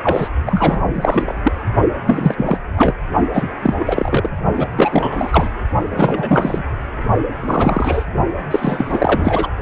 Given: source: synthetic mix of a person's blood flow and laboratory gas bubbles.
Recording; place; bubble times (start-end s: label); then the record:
Doppler ultrasound of blood flow; precordium
0.02-0.29 s: bubbles
0.46-0.81 s: bubbles
0.89-1.40 s: bubbles
1.44-1.52 s: bubbles
2.06-2.59 s: bubbles
2.77-2.94 s: bubbles
3.33-3.48 s: bubbles
3.62-3.74 s: bubbles
3.77-4.29 s: bubbles
4.56-4.68 s: bubbles
4.76-5.49 s: bubbles
5.91-6.62 s: bubbles
7.40-8.05 s: bubbles
8.50-9.48 s: bubbles
From the record:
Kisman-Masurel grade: 333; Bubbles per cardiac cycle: rolling drumbeat, 9 or more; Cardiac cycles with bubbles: 50 to 99%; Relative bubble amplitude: loud (0.450 to 0.775); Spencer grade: 3 (all of the cardiac periods contain showers or single bubble signals, but not dominating or overriding the cardiac motion signals); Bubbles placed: only in the low amplitude regions of the cardiac cycle